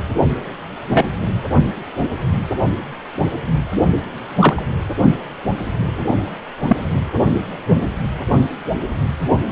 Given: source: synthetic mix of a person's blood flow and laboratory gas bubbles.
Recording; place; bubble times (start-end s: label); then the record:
Doppler ultrasound of blood flow; precordium
0.88-1.03 s: bubbles
4.38-4.62 s: bubbles
6.68-6.76 s: bubbles
7.33-7.41 s: bubbles
From the record:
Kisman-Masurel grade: 123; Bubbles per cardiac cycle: 1 to 2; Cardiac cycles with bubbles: 10 to 50%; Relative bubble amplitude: loud (0.450 to 0.775); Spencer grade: 2 (many but less than half of the cardiac periods contain bubble signals, singularly or in groups); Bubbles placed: only in the low amplitude regions of the cardiac cycle